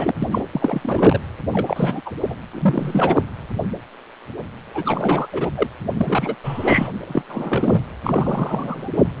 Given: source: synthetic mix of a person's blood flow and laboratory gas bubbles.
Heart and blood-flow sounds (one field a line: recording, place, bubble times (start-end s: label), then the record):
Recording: Doppler ultrasound of blood flow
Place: precordium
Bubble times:
0.00-0.15 s: bubbles
0.20-0.28 s: bubbles
0.31-0.42 s: bubbles
0.52-1.21 s: bubbles
1.52-2.01 s: bubbles
2.05-2.11 s: bubbles
2.21-2.36 s: bubbles
2.53-3.22 s: bubbles
4.75-4.83 s: bubbles
4.85-5.28 s: bubbles
5.33-5.50 s: bubbles
5.56-5.67 s: bubbles
5.97-6.35 s: bubbles
6.43-6.89 s: bubbles
7.07-7.22 s: bubbles
7.29-7.81 s: bubbles
8.04-8.90 s: bubbles
8.95-9.05 s: bubbles
From the record:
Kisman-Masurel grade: 332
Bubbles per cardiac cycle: rolling drumbeat, 9 or more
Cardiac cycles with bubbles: 50 to 99%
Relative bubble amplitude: moderate (0.250 to 0.450)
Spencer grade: 3 (all of the cardiac periods contain showers or single bubble signals, but not dominating or overriding the cardiac motion signals)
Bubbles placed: anywhere in the cardiac cycle